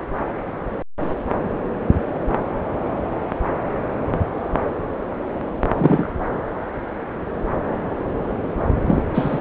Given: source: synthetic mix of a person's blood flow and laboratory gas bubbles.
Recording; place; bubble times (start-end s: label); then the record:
Doppler ultrasound of blood flow; subclavian vein
5.76-6.11 s: bubbles
8.86-9.02 s: bubbles
9.13-9.41 s: bubbles
From the record:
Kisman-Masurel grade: 223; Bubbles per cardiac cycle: several, 3 to 8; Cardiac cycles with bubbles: 10 to 50%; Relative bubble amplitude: loud (0.450 to 0.775); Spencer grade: 2 (many but less than half of the cardiac periods contain bubble signals, singularly or in groups); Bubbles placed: anywhere in the cardiac cycle